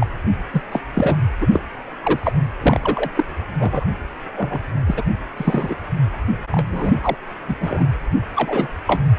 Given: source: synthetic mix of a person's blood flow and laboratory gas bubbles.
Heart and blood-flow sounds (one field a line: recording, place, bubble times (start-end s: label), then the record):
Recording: Doppler ultrasound of blood flow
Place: precordium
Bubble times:
0.00-0.07 s: bubbles
0.51-0.62 s: bubbles
0.72-0.80 s: bubbles
0.95-1.18 s: bubbles
1.41-1.48 s: bubbles
1.52-1.61 s: bubbles
2.03-2.31 s: bubbles
2.60-3.10 s: bubbles
3.17-3.25 s: bubbles
3.59-3.84 s: bubbles
4.36-4.59 s: bubbles
4.87-5.03 s: bubbles
5.37-5.75 s: bubbles
6.51-6.94 s: bubbles
7.03-7.16 s: bubbles
7.47-7.56 s: bubbles
7.60-7.86 s: bubbles
8.36-8.68 s: bubbles
8.87-9.02 s: bubbles
From the record:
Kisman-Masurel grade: 243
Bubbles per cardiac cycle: several, 3 to 8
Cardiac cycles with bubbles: 100%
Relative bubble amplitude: loud (0.450 to 0.775)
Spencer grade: 3 (all of the cardiac periods contain showers or single bubble signals, but not dominating or overriding the cardiac motion signals)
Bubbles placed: anywhere in the cardiac cycle